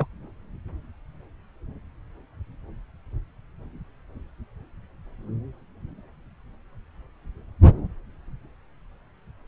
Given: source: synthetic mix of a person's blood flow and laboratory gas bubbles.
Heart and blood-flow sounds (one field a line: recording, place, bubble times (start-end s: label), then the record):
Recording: Doppler ultrasound of blood flow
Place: subclavian vein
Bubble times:
0.00-0.06 s: bubbles
From the record:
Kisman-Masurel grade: 112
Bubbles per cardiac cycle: 1 to 2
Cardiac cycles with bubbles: 1 to 10%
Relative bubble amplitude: moderate (0.250 to 0.450)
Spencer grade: 1 (occasional bubble signal discernible with the cardiac motion signal, with majority of cardiac periods free of bubbles)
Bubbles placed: anywhere in the cardiac cycle